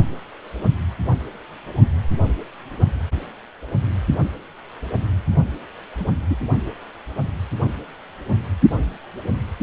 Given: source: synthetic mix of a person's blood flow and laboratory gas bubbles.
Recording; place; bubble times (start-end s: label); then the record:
Doppler ultrasound of blood flow; precordium
6.00-6.06 s: bubbles
6.29-6.36 s: bubbles
From the record:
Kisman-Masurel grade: 112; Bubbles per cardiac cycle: 1 to 2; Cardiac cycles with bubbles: 1 to 10%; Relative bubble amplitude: moderate (0.250 to 0.450); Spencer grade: 1 (occasional bubble signal discernible with the cardiac motion signal, with majority of cardiac periods free of bubbles); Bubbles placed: only in the low amplitude regions of the cardiac cycle